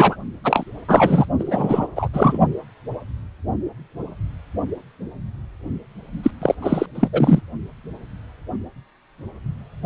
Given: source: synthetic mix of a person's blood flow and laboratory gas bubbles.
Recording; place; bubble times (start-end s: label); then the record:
Doppler ultrasound of blood flow; precordium
0.00-0.16 s: bubbles
0.44-0.64 s: bubbles
0.88-1.25 s: bubbles
1.39-1.88 s: bubbles
1.95-2.08 s: bubbles
2.13-2.38 s: bubbles
6.23-6.31 s: bubbles
6.42-6.55 s: bubbles
6.62-6.86 s: bubbles
6.95-7.08 s: bubbles
7.12-7.41 s: bubbles
From the record:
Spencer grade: 3 (all of the cardiac periods contain showers or single bubble signals, but not dominating or overriding the cardiac motion signals); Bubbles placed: only in the low amplitude regions of the cardiac cycle